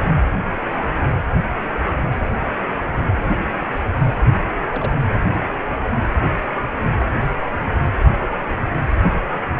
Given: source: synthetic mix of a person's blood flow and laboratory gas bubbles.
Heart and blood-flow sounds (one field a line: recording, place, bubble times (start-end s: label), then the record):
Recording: Doppler ultrasound of blood flow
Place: precordium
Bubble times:
4.70-4.94 s: bubbles
5.34-5.42 s: bubbles
6.99-7.06 s: bubbles
From the record:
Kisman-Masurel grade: 121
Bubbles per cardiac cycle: 1 to 2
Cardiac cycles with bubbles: 10 to 50%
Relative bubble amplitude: barely perceptible (0.100 to 0.250)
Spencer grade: 2 (many but less than half of the cardiac periods contain bubble signals, singularly or in groups)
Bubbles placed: anywhere in the cardiac cycle